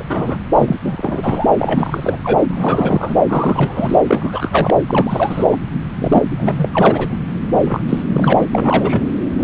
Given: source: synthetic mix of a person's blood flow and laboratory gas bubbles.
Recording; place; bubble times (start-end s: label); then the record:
Doppler ultrasound of blood flow; subclavian vein
0.00-0.37 s: bubbles
0.55-0.76 s: bubbles
0.84-1.48 s: bubbles
1.58-3.16 s: bubbles
3.27-3.96 s: bubbles
4.07-4.79 s: bubbles
4.89-5.57 s: bubbles
5.98-6.22 s: bubbles
6.37-6.68 s: bubbles
6.73-7.18 s: bubbles
7.56-8.03 s: bubbles
8.09-8.33 s: bubbles
8.37-8.45 s: bubbles
8.51-9.06 s: bubbles
9.38-9.44 s: bubbles
From the record:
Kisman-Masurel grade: 343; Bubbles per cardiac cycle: rolling drumbeat, 9 or more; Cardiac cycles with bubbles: 100%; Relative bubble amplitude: loud (0.450 to 0.775); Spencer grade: 3 (all of the cardiac periods contain showers or single bubble signals, but not dominating or overriding the cardiac motion signals); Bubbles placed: anywhere in the cardiac cycle